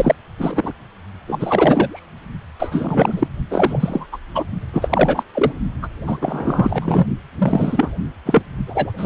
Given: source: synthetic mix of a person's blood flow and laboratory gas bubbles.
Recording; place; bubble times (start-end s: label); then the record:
Doppler ultrasound of blood flow; precordium
0.00-0.15 s: bubbles
0.37-0.73 s: bubbles
1.27-2.06 s: bubbles
2.59-3.27 s: bubbles
3.50-4.06 s: bubbles
4.12-4.17 s: bubbles
4.35-4.45 s: bubbles
4.72-5.23 s: bubbles
5.33-5.53 s: bubbles
5.82-5.88 s: bubbles
6.07-6.17 s: bubbles
6.21-7.05 s: bubbles
7.38-7.91 s: bubbles
8.25-8.42 s: bubbles
8.66-8.91 s: bubbles
8.97-9.06 s: bubbles
From the record:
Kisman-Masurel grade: 343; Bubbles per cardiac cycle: rolling drumbeat, 9 or more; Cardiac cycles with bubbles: 100%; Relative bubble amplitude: loud (0.450 to 0.775); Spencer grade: 3 (all of the cardiac periods contain showers or single bubble signals, but not dominating or overriding the cardiac motion signals); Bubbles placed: only in the low amplitude regions of the cardiac cycle